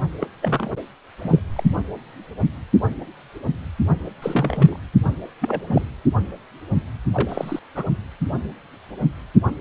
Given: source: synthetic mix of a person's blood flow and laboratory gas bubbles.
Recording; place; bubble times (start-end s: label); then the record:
Doppler ultrasound of blood flow; precordium
0.20-0.26 s: bubbles
0.42-0.71 s: bubbles
1.23-1.39 s: bubbles
1.56-1.64 s: bubbles
4.22-4.76 s: bubbles
5.41-5.62 s: bubbles
5.67-5.83 s: bubbles
7.14-7.59 s: bubbles
7.75-7.84 s: bubbles
From the record:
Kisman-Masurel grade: 222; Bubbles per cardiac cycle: several, 3 to 8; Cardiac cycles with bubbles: 10 to 50%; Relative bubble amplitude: moderate (0.250 to 0.450); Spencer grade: 2 (many but less than half of the cardiac periods contain bubble signals, singularly or in groups); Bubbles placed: anywhere in the cardiac cycle